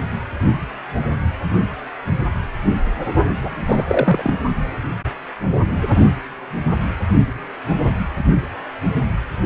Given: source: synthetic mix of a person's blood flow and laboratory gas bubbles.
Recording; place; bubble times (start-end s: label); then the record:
Doppler ultrasound of blood flow; precordium
3.43-3.62 s: bubbles
3.67-3.84 s: bubbles
3.88-4.33 s: bubbles
From the record:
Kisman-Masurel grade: 212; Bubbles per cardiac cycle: several, 3 to 8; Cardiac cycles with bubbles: 1 to 10%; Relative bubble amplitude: moderate (0.250 to 0.450); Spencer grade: 1 (occasional bubble signal discernible with the cardiac motion signal, with majority of cardiac periods free of bubbles); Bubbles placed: only in the low amplitude regions of the cardiac cycle